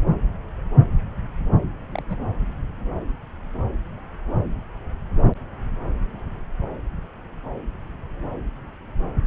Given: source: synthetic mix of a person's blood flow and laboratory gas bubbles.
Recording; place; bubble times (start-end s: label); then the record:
Doppler ultrasound of blood flow; subclavian vein
1.92-2.02 s: bubbles
2.09-2.17 s: bubbles
From the record:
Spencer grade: 1 (occasional bubble signal discernible with the cardiac motion signal, with majority of cardiac periods free of bubbles); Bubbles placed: anywhere in the cardiac cycle